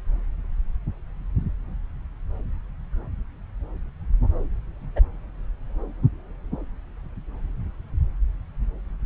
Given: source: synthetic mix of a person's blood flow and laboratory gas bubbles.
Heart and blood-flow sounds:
Doppler ultrasound of blood flow; subclavian vein
4.96-5.00 s: bubbles
From the record:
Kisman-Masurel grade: 112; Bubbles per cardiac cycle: 1 to 2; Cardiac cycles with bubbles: 1 to 10%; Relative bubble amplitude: moderate (0.250 to 0.450); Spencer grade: 1 (occasional bubble signal discernible with the cardiac motion signal, with majority of cardiac periods free of bubbles); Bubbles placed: anywhere in the cardiac cycle

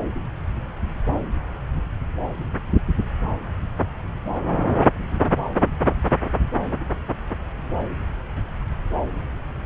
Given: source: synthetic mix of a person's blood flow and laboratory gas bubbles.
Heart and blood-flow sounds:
Doppler ultrasound of blood flow; subclavian vein
no bubbles
From the record:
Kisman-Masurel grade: 000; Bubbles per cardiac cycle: 0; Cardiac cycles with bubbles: 0%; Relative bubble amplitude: no bubbles discernible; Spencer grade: 0 (complete lack of bubble signals)

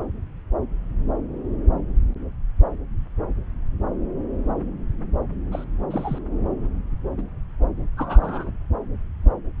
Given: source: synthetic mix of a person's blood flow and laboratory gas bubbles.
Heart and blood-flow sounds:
Doppler ultrasound of blood flow; subclavian vein
5.51-5.64 s: bubbles
5.91-6.18 s: bubbles
7.17-7.21 s: bubbles
7.96-8.51 s: bubbles
From the record:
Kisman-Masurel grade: 122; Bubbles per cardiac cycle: 1 to 2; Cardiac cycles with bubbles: 10 to 50%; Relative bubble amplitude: moderate (0.250 to 0.450); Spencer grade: 2 (many but less than half of the cardiac periods contain bubble signals, singularly or in groups); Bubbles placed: anywhere in the cardiac cycle

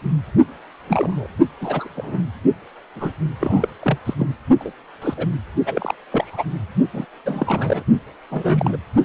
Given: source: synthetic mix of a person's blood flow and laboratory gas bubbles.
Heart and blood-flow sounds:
Doppler ultrasound of blood flow; precordium
0.88-1.28 s: bubbles
1.60-1.88 s: bubbles
1.96-2.22 s: bubbles
2.95-3.11 s: bubbles
3.40-3.73 s: bubbles
3.82-3.98 s: bubbles
4.05-4.14 s: bubbles
4.19-4.26 s: bubbles
4.59-4.72 s: bubbles
5.01-5.14 s: bubbles
5.17-5.27 s: bubbles
5.66-5.94 s: bubbles
6.12-6.44 s: bubbles
6.93-7.05 s: bubbles
7.25-7.83 s: bubbles
8.31-8.77 s: bubbles
From the record:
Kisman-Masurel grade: 242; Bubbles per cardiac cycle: several, 3 to 8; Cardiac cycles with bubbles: 100%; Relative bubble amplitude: moderate (0.250 to 0.450); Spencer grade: 3 (all of the cardiac periods contain showers or single bubble signals, but not dominating or overriding the cardiac motion signals); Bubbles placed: only in the low amplitude regions of the cardiac cycle

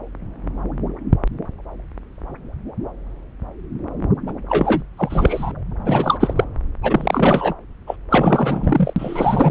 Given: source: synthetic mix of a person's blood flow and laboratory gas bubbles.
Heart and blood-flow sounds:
Doppler ultrasound of blood flow; subclavian vein
4.26-4.33 s: bubbles
4.48-4.83 s: bubbles
4.97-5.51 s: bubbles
5.85-6.45 s: bubbles
6.83-7.54 s: bubbles
7.87-7.96 s: bubbles
8.10-8.94 s: bubbles
8.96-9.51 s: bubbles
From the record:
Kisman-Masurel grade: 333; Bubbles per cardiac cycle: rolling drumbeat, 9 or more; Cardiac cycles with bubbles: 50 to 99%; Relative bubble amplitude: loud (0.450 to 0.775); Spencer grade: 3 (all of the cardiac periods contain showers or single bubble signals, but not dominating or overriding the cardiac motion signals); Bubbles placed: anywhere in the cardiac cycle

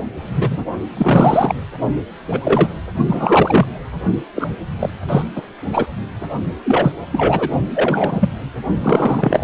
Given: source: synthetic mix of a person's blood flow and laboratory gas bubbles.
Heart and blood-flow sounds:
Doppler ultrasound of blood flow; precordium
0.36-0.65 s: bubbles
0.97-1.55 s: bubbles
2.31-2.40 s: bubbles
2.44-2.69 s: bubbles
3.07-3.67 s: bubbles
4.35-4.47 s: bubbles
4.79-4.90 s: bubbles
5.08-5.22 s: bubbles
5.35-5.42 s: bubbles
5.71-5.86 s: bubbles
6.64-6.92 s: bubbles
7.12-7.49 s: bubbles
7.75-8.29 s: bubbles
8.81-9.44 s: bubbles
From the record:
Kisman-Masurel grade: 243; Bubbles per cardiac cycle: several, 3 to 8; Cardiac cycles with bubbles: 100%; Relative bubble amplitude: loud (0.450 to 0.775); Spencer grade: 3 (all of the cardiac periods contain showers or single bubble signals, but not dominating or overriding the cardiac motion signals); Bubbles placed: only in the low amplitude regions of the cardiac cycle

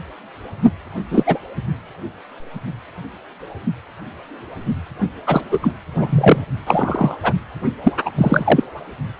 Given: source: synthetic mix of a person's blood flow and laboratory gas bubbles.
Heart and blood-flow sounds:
Doppler ultrasound of blood flow; precordium
1.10-1.24 s: bubbles
1.26-1.39 s: bubbles
5.26-5.42 s: bubbles
5.51-5.72 s: bubbles
6.00-6.42 s: bubbles
6.66-7.17 s: bubbles
7.22-7.33 s: bubbles
7.84-7.95 s: bubbles
8.05-8.11 s: bubbles
8.17-8.64 s: bubbles
From the record:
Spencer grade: 3 (all of the cardiac periods contain showers or single bubble signals, but not dominating or overriding the cardiac motion signals); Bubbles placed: only in the low amplitude regions of the cardiac cycle

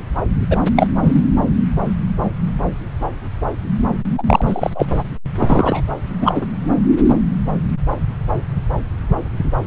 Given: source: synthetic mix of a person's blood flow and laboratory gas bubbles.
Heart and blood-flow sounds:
Doppler ultrasound of blood flow; subclavian vein
0.50-0.59 s: bubbles
0.76-0.88 s: bubbles
1.03-1.26 s: bubbles
4.17-4.23 s: bubbles
4.26-4.70 s: bubbles
4.75-4.86 s: bubbles
5.37-5.83 s: bubbles
6.21-6.46 s: bubbles
From the record:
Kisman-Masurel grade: 223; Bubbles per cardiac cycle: several, 3 to 8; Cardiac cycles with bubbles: 10 to 50%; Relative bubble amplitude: loud (0.450 to 0.775); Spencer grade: 2 (many but less than half of the cardiac periods contain bubble signals, singularly or in groups); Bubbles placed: anywhere in the cardiac cycle

